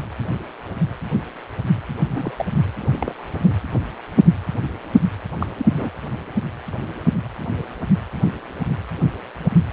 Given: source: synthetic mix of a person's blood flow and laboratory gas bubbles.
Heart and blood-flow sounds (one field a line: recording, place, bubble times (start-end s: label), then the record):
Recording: Doppler ultrasound of blood flow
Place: precordium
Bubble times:
2.08-2.46 s: bubbles
2.81-3.27 s: bubbles
3.42-3.54 s: bubbles
5.41-5.46 s: bubbles
5.58-5.68 s: bubbles
5.71-5.89 s: bubbles
From the record:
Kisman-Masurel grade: 221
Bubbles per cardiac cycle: several, 3 to 8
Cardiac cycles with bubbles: 10 to 50%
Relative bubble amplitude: barely perceptible (0.100 to 0.250)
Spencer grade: 2 (many but less than half of the cardiac periods contain bubble signals, singularly or in groups)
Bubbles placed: anywhere in the cardiac cycle